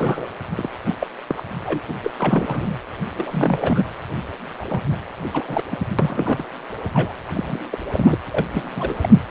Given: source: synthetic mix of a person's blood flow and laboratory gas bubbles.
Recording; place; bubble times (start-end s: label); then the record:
Doppler ultrasound of blood flow; precordium
0.00-0.27 s: bubbles
0.55-0.70 s: bubbles
0.83-0.95 s: bubbles
0.99-1.07 s: bubbles
1.27-1.42 s: bubbles
1.65-1.81 s: bubbles
1.88-1.94 s: bubbles
2.04-2.10 s: bubbles
2.18-2.77 s: bubbles
3.17-3.83 s: bubbles
4.58-4.65 s: bubbles
4.68-4.81 s: bubbles
4.89-4.97 s: bubbles
5.33-5.43 s: bubbles
5.47-5.62 s: bubbles
5.70-5.77 s: bubbles
5.98-6.43 s: bubbles
6.93-7.13 s: bubbles
7.33-7.58 s: bubbles
7.71-7.79 s: bubbles
7.92-8.19 s: bubbles
8.30-8.45 s: bubbles
8.53-8.71 s: bubbles
8.76-8.95 s: bubbles
9.02-9.20 s: bubbles
From the record:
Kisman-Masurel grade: 342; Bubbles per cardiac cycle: rolling drumbeat, 9 or more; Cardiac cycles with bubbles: 100%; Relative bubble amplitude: moderate (0.250 to 0.450); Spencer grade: 3 (all of the cardiac periods contain showers or single bubble signals, but not dominating or overriding the cardiac motion signals); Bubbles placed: anywhere in the cardiac cycle